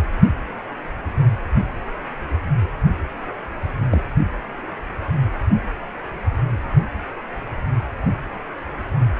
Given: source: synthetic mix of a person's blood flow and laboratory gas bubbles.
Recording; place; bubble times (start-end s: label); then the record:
Doppler ultrasound of blood flow; precordium
3.91-4.01 s: bubbles
From the record:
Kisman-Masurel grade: 112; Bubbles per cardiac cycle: 1 to 2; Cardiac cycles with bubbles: 1 to 10%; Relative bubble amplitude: moderate (0.250 to 0.450); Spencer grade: 1 (occasional bubble signal discernible with the cardiac motion signal, with majority of cardiac periods free of bubbles); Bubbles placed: anywhere in the cardiac cycle